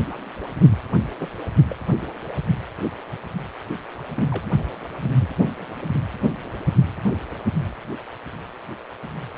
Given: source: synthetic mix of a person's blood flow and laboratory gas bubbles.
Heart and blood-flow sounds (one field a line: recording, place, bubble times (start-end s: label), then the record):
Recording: Doppler ultrasound of blood flow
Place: precordium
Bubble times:
1.19-1.28 s: bubbles
1.70-1.76 s: bubbles
4.16-4.25 s: bubbles
4.31-4.50 s: bubbles
5.10-5.27 s: bubbles
5.39-5.56 s: bubbles
From the record:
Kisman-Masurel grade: 221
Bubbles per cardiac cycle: several, 3 to 8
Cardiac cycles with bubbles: 10 to 50%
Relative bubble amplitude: barely perceptible (0.100 to 0.250)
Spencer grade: 2 (many but less than half of the cardiac periods contain bubble signals, singularly or in groups)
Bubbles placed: anywhere in the cardiac cycle